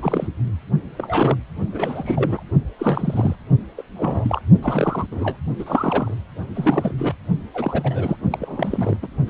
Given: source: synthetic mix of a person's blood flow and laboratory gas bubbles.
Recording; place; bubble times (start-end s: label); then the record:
Doppler ultrasound of blood flow; precordium
0.00-0.28 s: bubbles
0.97-1.35 s: bubbles
1.73-2.42 s: bubbles
2.79-3.36 s: bubbles
3.77-3.83 s: bubbles
3.96-4.42 s: bubbles
4.62-5.06 s: bubbles
5.11-5.37 s: bubbles
5.58-6.14 s: bubbles
6.55-6.93 s: bubbles
6.98-7.14 s: bubbles
7.54-8.16 s: bubbles
8.30-8.97 s: bubbles
9.02-9.08 s: bubbles
9.27-9.30 s: bubbles
From the record:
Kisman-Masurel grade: 232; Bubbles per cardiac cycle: several, 3 to 8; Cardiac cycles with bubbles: 50 to 99%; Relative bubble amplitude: moderate (0.250 to 0.450); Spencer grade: 3 (all of the cardiac periods contain showers or single bubble signals, but not dominating or overriding the cardiac motion signals); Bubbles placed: only in the low amplitude regions of the cardiac cycle